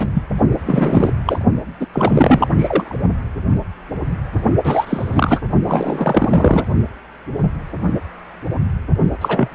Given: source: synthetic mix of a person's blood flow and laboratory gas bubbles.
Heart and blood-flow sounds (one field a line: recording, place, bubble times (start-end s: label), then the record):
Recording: Doppler ultrasound of blood flow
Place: precordium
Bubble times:
0.00-0.08 s: bubbles
0.14-0.23 s: bubbles
0.66-1.12 s: bubbles
1.25-1.45 s: bubbles
1.80-1.86 s: bubbles
1.93-2.47 s: bubbles
2.56-2.98 s: bubbles
4.64-5.40 s: bubbles
5.65-6.66 s: bubbles
9.21-9.49 s: bubbles
9.52-9.54 s: bubbles
From the record:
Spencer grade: 3 (all of the cardiac periods contain showers or single bubble signals, but not dominating or overriding the cardiac motion signals)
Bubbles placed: only in the low amplitude regions of the cardiac cycle